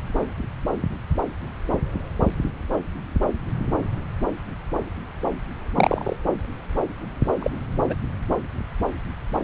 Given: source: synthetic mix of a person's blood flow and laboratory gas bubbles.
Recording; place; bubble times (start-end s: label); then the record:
Doppler ultrasound of blood flow; subclavian vein
5.75-6.16 s: bubbles
7.40-7.50 s: bubbles
7.89-7.95 s: bubbles
From the record:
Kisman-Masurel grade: 122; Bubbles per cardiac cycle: 1 to 2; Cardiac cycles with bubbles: 10 to 50%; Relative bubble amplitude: moderate (0.250 to 0.450); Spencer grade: 2 (many but less than half of the cardiac periods contain bubble signals, singularly or in groups); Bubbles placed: anywhere in the cardiac cycle